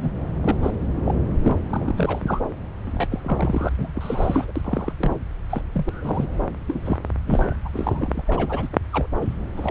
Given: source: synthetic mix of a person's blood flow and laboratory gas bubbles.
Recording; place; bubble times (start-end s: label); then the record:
Doppler ultrasound of blood flow; subclavian vein
0.00-0.10 s: bubbles
0.41-0.56 s: bubbles
0.62-0.71 s: bubbles
1.04-1.15 s: bubbles
1.43-1.57 s: bubbles
1.69-2.41 s: bubbles
2.86-3.07 s: bubbles
3.10-3.19 s: bubbles
3.23-3.69 s: bubbles
3.78-3.92 s: bubbles
3.94-4.52 s: bubbles
4.56-4.62 s: bubbles
4.64-4.93 s: bubbles
5.00-5.12 s: bubbles
5.50-5.63 s: bubbles
5.74-5.91 s: bubbles
6.02-6.27 s: bubbles
6.67-6.81 s: bubbles
6.85-6.99 s: bubbles
7.26-7.55 s: bubbles
7.65-7.69 s: bubbles
7.73-8.24 s: bubbles
8.27-8.68 s: bubbles
8.72-8.77 s: bubbles
8.92-9.07 s: bubbles
9.21-9.35 s: bubbles
9.56-9.71 s: bubbles
From the record:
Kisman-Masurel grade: 242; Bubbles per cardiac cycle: several, 3 to 8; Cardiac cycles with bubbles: 100%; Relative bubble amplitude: moderate (0.250 to 0.450); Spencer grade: 3 (all of the cardiac periods contain showers or single bubble signals, but not dominating or overriding the cardiac motion signals); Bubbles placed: anywhere in the cardiac cycle